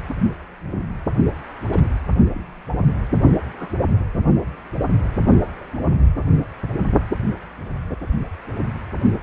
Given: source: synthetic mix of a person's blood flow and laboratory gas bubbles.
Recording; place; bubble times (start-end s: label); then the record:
Doppler ultrasound of blood flow; precordium
1.71-1.84 s: bubbles
2.33-2.41 s: bubbles
3.58-3.71 s: bubbles
From the record:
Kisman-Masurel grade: 121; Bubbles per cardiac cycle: 1 to 2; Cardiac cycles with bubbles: 10 to 50%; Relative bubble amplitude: barely perceptible (0.100 to 0.250); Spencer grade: 2 (many but less than half of the cardiac periods contain bubble signals, singularly or in groups); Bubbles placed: only in the low amplitude regions of the cardiac cycle